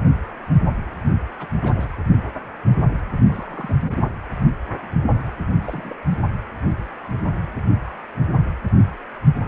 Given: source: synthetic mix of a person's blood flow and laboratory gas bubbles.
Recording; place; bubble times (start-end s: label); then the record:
Doppler ultrasound of blood flow; precordium
1.39-1.47 s: bubbles
1.56-1.89 s: bubbles
3.27-3.75 s: bubbles
3.87-3.97 s: bubbles
5.64-5.96 s: bubbles
From the record:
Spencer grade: 2 (many but less than half of the cardiac periods contain bubble signals, singularly or in groups); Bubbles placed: anywhere in the cardiac cycle